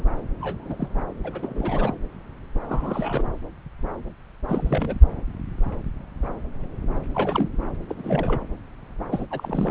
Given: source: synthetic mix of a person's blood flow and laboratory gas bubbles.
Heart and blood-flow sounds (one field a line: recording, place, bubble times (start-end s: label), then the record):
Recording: Doppler ultrasound of blood flow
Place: subclavian vein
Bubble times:
0.40-0.76 s: bubbles
0.79-0.88 s: bubbles
1.24-1.96 s: bubbles
2.68-3.25 s: bubbles
4.48-4.97 s: bubbles
7.14-7.49 s: bubbles
7.88-7.95 s: bubbles
7.97-8.40 s: bubbles
9.11-9.26 s: bubbles
9.30-9.71 s: bubbles
From the record:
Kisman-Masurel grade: 221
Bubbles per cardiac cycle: several, 3 to 8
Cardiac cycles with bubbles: 10 to 50%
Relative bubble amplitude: barely perceptible (0.100 to 0.250)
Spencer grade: 2 (many but less than half of the cardiac periods contain bubble signals, singularly or in groups)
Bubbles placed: anywhere in the cardiac cycle